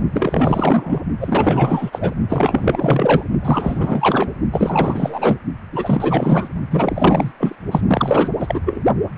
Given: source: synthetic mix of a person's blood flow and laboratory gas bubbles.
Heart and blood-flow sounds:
Doppler ultrasound of blood flow; precordium
0.12-1.04 s: bubbles
1.20-2.14 s: bubbles
2.29-3.25 s: bubbles
3.41-4.29 s: bubbles
4.52-5.38 s: bubbles
5.71-6.50 s: bubbles
6.71-7.32 s: bubbles
7.39-7.55 s: bubbles
7.71-7.81 s: bubbles
7.87-8.36 s: bubbles
8.39-8.61 s: bubbles
8.65-8.83 s: bubbles
9.16-9.18 s: bubbles
From the record:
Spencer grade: 4 (maximum detectable bubble signal sounding continuously throughout systole and diastole of every cardiac period, and overriding the amplitude of the normal cardiac signals); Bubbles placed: only in the low amplitude regions of the cardiac cycle

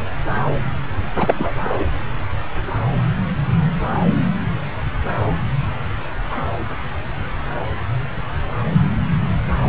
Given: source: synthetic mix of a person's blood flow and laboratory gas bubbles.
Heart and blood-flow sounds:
Doppler ultrasound of blood flow; subclavian vein
1.19-1.34 s: bubbles
1.38-1.55 s: bubbles
1.64-1.86 s: bubbles
From the record:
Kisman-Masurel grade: 212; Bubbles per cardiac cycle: several, 3 to 8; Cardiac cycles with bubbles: 1 to 10%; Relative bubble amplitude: moderate (0.250 to 0.450); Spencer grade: 1 (occasional bubble signal discernible with the cardiac motion signal, with majority of cardiac periods free of bubbles); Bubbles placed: anywhere in the cardiac cycle

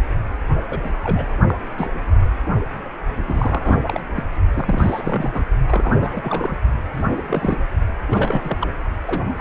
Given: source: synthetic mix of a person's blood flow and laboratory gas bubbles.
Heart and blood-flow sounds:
Doppler ultrasound of blood flow; precordium
0.68-0.90 s: bubbles
1.03-1.27 s: bubbles
1.48-1.54 s: bubbles
1.78-1.91 s: bubbles
3.27-3.79 s: bubbles
3.85-4.00 s: bubbles
4.15-4.24 s: bubbles
4.54-5.42 s: bubbles
5.68-6.56 s: bubbles
6.93-7.58 s: bubbles
8.10-8.57 s: bubbles
8.60-8.71 s: bubbles
9.05-9.24 s: bubbles
9.37-9.41 s: bubbles
From the record:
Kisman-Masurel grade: 332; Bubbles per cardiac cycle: rolling drumbeat, 9 or more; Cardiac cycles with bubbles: 50 to 99%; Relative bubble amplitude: moderate (0.250 to 0.450); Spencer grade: 3 (all of the cardiac periods contain showers or single bubble signals, but not dominating or overriding the cardiac motion signals); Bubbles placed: only in the low amplitude regions of the cardiac cycle

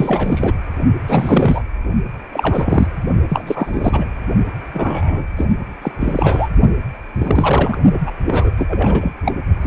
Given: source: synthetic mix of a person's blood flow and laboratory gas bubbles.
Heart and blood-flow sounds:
Doppler ultrasound of blood flow; precordium
0.00-0.52 s: bubbles
1.08-1.62 s: bubbles
2.33-2.87 s: bubbles
3.29-4.05 s: bubbles
4.74-5.25 s: bubbles
5.37-5.45 s: bubbles
5.82-5.92 s: bubbles
6.00-6.49 s: bubbles
7.18-7.78 s: bubbles
7.93-7.98 s: bubbles
8.06-8.12 s: bubbles
8.27-8.50 s: bubbles
8.57-9.12 s: bubbles
9.26-9.34 s: bubbles
9.62-9.67 s: bubbles
From the record:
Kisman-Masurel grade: 343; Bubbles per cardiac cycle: rolling drumbeat, 9 or more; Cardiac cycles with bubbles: 100%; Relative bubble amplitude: loud (0.450 to 0.775); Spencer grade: 3 (all of the cardiac periods contain showers or single bubble signals, but not dominating or overriding the cardiac motion signals); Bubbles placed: only in the low amplitude regions of the cardiac cycle

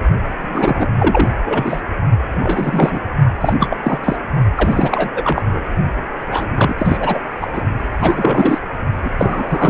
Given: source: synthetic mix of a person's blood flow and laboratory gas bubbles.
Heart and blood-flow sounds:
Doppler ultrasound of blood flow; precordium
0.41-0.86 s: bubbles
0.99-1.29 s: bubbles
1.44-1.81 s: bubbles
2.35-2.98 s: bubbles
3.40-3.53 s: bubbles
3.60-3.77 s: bubbles
3.83-4.01 s: bubbles
4.04-4.17 s: bubbles
4.57-5.08 s: bubbles
5.15-5.60 s: bubbles
6.31-6.48 s: bubbles
6.56-6.75 s: bubbles
6.78-7.22 s: bubbles
7.41-7.47 s: bubbles
7.53-7.62 s: bubbles
8.00-8.59 s: bubbles
9.04-9.11 s: bubbles
9.18-9.70 s: bubbles
From the record:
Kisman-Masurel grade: 343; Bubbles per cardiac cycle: rolling drumbeat, 9 or more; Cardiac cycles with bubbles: 100%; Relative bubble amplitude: loud (0.450 to 0.775); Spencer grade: 3 (all of the cardiac periods contain showers or single bubble signals, but not dominating or overriding the cardiac motion signals); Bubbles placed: only in the low amplitude regions of the cardiac cycle

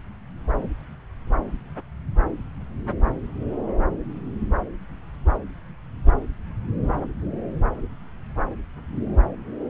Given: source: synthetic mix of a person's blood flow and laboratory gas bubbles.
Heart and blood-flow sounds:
Doppler ultrasound of blood flow; subclavian vein
no bubbles
From the record:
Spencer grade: 0 (complete lack of bubble signals)

